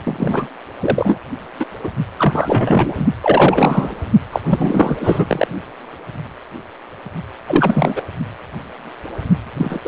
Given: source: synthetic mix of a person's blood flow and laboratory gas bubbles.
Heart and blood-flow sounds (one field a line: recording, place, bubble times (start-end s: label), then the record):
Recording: Doppler ultrasound of blood flow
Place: precordium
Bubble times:
0.04-0.47 s: bubbles
0.80-1.19 s: bubbles
1.59-1.66 s: bubbles
1.83-1.89 s: bubbles
2.17-3.06 s: bubbles
3.22-3.96 s: bubbles
4.32-4.41 s: bubbles
4.44-5.48 s: bubbles
7.47-8.03 s: bubbles
9.57-9.81 s: bubbles
9.85-9.88 s: bubbles
From the record:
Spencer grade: 3 (all of the cardiac periods contain showers or single bubble signals, but not dominating or overriding the cardiac motion signals)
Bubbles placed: only in the low amplitude regions of the cardiac cycle